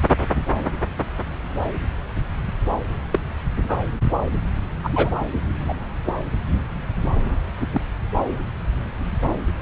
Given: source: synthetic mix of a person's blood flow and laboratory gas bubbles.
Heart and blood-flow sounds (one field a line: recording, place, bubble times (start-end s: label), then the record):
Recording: Doppler ultrasound of blood flow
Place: subclavian vein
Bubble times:
3.12-3.18 s: bubbles
3.68-3.80 s: bubbles
4.83-5.10 s: bubbles
5.68-5.73 s: bubbles
6.04-6.13 s: bubbles
7.72-7.80 s: bubbles
From the record:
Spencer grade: 2 (many but less than half of the cardiac periods contain bubble signals, singularly or in groups)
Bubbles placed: anywhere in the cardiac cycle